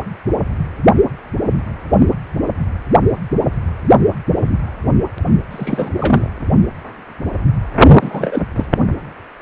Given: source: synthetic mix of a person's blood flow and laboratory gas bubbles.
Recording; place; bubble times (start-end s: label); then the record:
Doppler ultrasound of blood flow; precordium
5.50-6.30 s: bubbles
8.01-8.42 s: bubbles
8.55-8.66 s: bubbles
From the record:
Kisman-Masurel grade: 223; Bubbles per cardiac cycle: several, 3 to 8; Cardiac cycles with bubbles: 10 to 50%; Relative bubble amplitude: loud (0.450 to 0.775); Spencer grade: 2 (many but less than half of the cardiac periods contain bubble signals, singularly or in groups); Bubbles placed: only in the low amplitude regions of the cardiac cycle